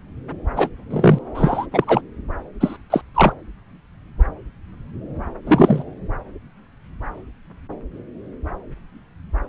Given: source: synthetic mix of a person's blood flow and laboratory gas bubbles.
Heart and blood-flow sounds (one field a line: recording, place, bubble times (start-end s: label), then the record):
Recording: Doppler ultrasound of blood flow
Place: subclavian vein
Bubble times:
0.56-0.69 s: bubbles
0.90-1.19 s: bubbles
1.34-1.67 s: bubbles
1.71-2.01 s: bubbles
2.60-2.77 s: bubbles
2.90-3.02 s: bubbles
3.15-3.33 s: bubbles
5.46-5.83 s: bubbles
From the record:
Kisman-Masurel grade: 223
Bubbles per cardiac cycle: several, 3 to 8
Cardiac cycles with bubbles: 10 to 50%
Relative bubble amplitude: loud (0.450 to 0.775)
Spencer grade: 2 (many but less than half of the cardiac periods contain bubble signals, singularly or in groups)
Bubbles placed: anywhere in the cardiac cycle